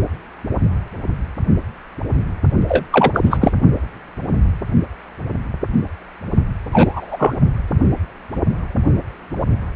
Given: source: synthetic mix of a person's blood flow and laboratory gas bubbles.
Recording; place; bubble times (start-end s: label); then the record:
Doppler ultrasound of blood flow; precordium
2.68-2.84 s: bubbles
2.92-3.11 s: bubbles
3.13-3.38 s: bubbles
3.41-3.52 s: bubbles
6.72-7.35 s: bubbles
From the record:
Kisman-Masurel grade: 223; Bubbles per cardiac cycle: several, 3 to 8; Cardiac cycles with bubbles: 10 to 50%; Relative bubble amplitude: loud (0.450 to 0.775); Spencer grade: 2 (many but less than half of the cardiac periods contain bubble signals, singularly or in groups); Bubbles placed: only in the low amplitude regions of the cardiac cycle